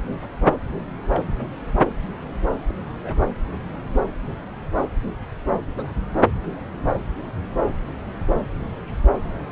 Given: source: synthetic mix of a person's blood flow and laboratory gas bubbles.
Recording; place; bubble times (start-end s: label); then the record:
Doppler ultrasound of blood flow; subclavian vein
0.21-0.29 s: bubbles
1.10-1.24 s: bubbles
2.69-2.74 s: bubbles
3.01-3.16 s: bubbles
5.77-5.93 s: bubbles
From the record:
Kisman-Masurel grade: 121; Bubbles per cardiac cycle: 1 to 2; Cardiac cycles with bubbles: 10 to 50%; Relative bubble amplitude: barely perceptible (0.100 to 0.250); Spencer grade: 2 (many but less than half of the cardiac periods contain bubble signals, singularly or in groups); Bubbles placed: anywhere in the cardiac cycle